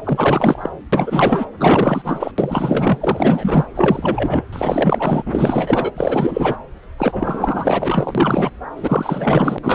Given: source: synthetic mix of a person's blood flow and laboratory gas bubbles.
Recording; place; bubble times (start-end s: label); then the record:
Doppler ultrasound of blood flow; subclavian vein
0.04-0.69 s: bubbles
0.92-1.46 s: bubbles
1.57-2.32 s: bubbles
2.38-3.68 s: bubbles
3.75-4.42 s: bubbles
4.52-5.23 s: bubbles
5.25-5.91 s: bubbles
5.96-6.57 s: bubbles
6.98-8.50 s: bubbles
8.75-9.58 s: bubbles
9.62-9.74 s: bubbles
From the record:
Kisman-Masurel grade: 444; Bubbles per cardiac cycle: continuous sound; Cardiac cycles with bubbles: 100%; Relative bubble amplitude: maximal (0.775 to 0.999); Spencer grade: 4 (maximum detectable bubble signal sounding continuously throughout systole and diastole of every cardiac period, and overriding the amplitude of the normal cardiac signals); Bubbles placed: anywhere in the cardiac cycle